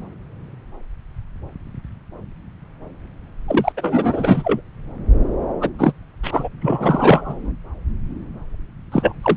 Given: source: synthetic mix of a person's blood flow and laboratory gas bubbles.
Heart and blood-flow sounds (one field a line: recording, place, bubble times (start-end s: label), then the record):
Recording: Doppler ultrasound of blood flow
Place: subclavian vein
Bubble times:
3.47-3.72 s: bubbles
3.77-4.61 s: bubbles
5.61-5.70 s: bubbles
5.78-5.93 s: bubbles
6.23-6.49 s: bubbles
6.61-7.54 s: bubbles
8.92-9.12 s: bubbles
9.22-9.37 s: bubbles
From the record:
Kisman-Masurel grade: 333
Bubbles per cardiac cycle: rolling drumbeat, 9 or more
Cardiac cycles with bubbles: 50 to 99%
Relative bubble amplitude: loud (0.450 to 0.775)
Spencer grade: 3 (all of the cardiac periods contain showers or single bubble signals, but not dominating or overriding the cardiac motion signals)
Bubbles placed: anywhere in the cardiac cycle